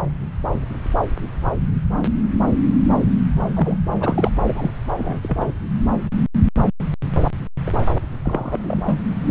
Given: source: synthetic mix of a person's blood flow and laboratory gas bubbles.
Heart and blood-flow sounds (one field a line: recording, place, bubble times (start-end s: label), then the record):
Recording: Doppler ultrasound of blood flow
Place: subclavian vein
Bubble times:
3.56-3.77 s: bubbles
4.00-4.30 s: bubbles
4.47-4.71 s: bubbles
4.99-5.20 s: bubbles
5.22-5.54 s: bubbles
7.67-7.71 s: bubbles
8.24-9.00 s: bubbles
From the record:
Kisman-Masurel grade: 222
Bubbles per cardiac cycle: several, 3 to 8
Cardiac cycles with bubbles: 10 to 50%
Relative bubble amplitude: moderate (0.250 to 0.450)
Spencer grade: 2 (many but less than half of the cardiac periods contain bubble signals, singularly or in groups)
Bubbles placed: anywhere in the cardiac cycle